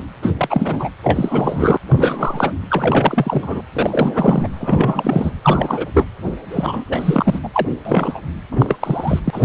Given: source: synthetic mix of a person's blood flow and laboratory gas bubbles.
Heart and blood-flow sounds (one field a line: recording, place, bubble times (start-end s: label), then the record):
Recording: Doppler ultrasound of blood flow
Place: precordium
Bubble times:
0.00-0.02 s: bubbles
0.23-0.33 s: bubbles
0.37-0.89 s: bubbles
1.04-1.78 s: bubbles
1.90-2.52 s: bubbles
2.68-3.61 s: bubbles
3.73-4.47 s: bubbles
4.53-5.33 s: bubbles
5.43-5.87 s: bubbles
5.94-6.05 s: bubbles
6.50-7.39 s: bubbles
7.43-7.49 s: bubbles
7.53-7.67 s: bubbles
7.85-8.20 s: bubbles
8.51-8.77 s: bubbles
8.81-9.19 s: bubbles
9.24-9.45 s: bubbles
From the record:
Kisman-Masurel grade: 343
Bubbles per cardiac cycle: rolling drumbeat, 9 or more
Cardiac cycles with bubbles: 100%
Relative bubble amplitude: loud (0.450 to 0.775)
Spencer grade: 3 (all of the cardiac periods contain showers or single bubble signals, but not dominating or overriding the cardiac motion signals)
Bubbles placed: anywhere in the cardiac cycle